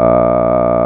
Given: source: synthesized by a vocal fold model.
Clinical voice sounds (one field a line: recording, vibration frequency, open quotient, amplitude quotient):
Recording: sustained vowel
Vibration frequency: 60 Hz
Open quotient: 0.2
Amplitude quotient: 1.2